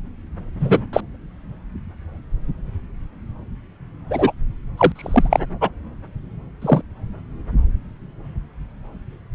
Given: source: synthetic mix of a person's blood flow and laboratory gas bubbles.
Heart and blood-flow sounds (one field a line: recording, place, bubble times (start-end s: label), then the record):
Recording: Doppler ultrasound of blood flow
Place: subclavian vein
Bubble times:
0.59-0.81 s: bubbles
0.93-1.01 s: bubbles
4.10-4.32 s: bubbles
4.78-4.92 s: bubbles
4.96-5.40 s: bubbles
5.61-5.69 s: bubbles
6.62-6.82 s: bubbles
From the record:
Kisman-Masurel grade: 123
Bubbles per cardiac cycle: 1 to 2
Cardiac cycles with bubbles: 10 to 50%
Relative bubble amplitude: loud (0.450 to 0.775)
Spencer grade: 2 (many but less than half of the cardiac periods contain bubble signals, singularly or in groups)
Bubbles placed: anywhere in the cardiac cycle